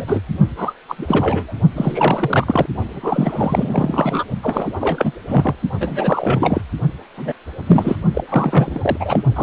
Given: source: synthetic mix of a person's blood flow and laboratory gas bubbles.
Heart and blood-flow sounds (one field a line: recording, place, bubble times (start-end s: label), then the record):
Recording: Doppler ultrasound of blood flow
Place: precordium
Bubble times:
0.00-0.21 s: bubbles
0.56-0.73 s: bubbles
0.89-0.96 s: bubbles
0.98-1.58 s: bubbles
1.75-2.66 s: bubbles
2.89-4.25 s: bubbles
4.42-4.70 s: bubbles
4.81-5.12 s: bubbles
5.28-5.55 s: bubbles
5.81-6.62 s: bubbles
7.17-7.33 s: bubbles
7.67-7.96 s: bubbles
8.14-8.24 s: bubbles
8.27-9.24 s: bubbles
9.35-9.43 s: bubbles
From the record:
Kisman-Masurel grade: 343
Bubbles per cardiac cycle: rolling drumbeat, 9 or more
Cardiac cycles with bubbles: 100%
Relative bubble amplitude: loud (0.450 to 0.775)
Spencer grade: 3 (all of the cardiac periods contain showers or single bubble signals, but not dominating or overriding the cardiac motion signals)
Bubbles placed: only in the low amplitude regions of the cardiac cycle